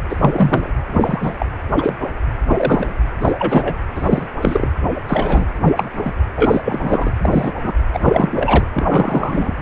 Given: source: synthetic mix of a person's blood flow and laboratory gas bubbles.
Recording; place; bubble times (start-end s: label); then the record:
Doppler ultrasound of blood flow; precordium
0.09-0.69 s: bubbles
0.93-1.32 s: bubbles
1.39-1.46 s: bubbles
1.77-1.94 s: bubbles
2.00-2.08 s: bubbles
2.46-2.93 s: bubbles
3.21-3.32 s: bubbles
3.38-3.75 s: bubbles
3.95-4.28 s: bubbles
4.41-4.70 s: bubbles
5.08-5.46 s: bubbles
5.63-6.14 s: bubbles
6.35-6.60 s: bubbles
6.64-7.12 s: bubbles
7.22-7.52 s: bubbles
7.63-7.73 s: bubbles
7.94-8.64 s: bubbles
8.72-9.54 s: bubbles
From the record:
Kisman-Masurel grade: 243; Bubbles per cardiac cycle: several, 3 to 8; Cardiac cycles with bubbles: 100%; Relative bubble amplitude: loud (0.450 to 0.775); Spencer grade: 3 (all of the cardiac periods contain showers or single bubble signals, but not dominating or overriding the cardiac motion signals); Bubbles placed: anywhere in the cardiac cycle